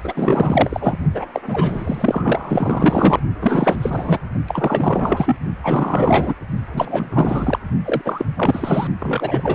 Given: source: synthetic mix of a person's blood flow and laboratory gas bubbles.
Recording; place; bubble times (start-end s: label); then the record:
Doppler ultrasound of blood flow; precordium
0.04-0.97 s: bubbles
1.14-1.26 s: bubbles
1.34-1.42 s: bubbles
1.48-3.20 s: bubbles
3.40-4.20 s: bubbles
4.47-5.37 s: bubbles
5.63-6.34 s: bubbles
6.72-7.59 s: bubbles
7.85-8.02 s: bubbles
8.05-8.25 s: bubbles
8.37-8.88 s: bubbles
8.99-9.55 s: bubbles
From the record:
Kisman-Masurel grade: 444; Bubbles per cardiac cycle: continuous sound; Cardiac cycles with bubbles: 100%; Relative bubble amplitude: maximal (0.775 to 0.999); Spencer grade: 4 (maximum detectable bubble signal sounding continuously throughout systole and diastole of every cardiac period, and overriding the amplitude of the normal cardiac signals); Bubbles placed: only in the low amplitude regions of the cardiac cycle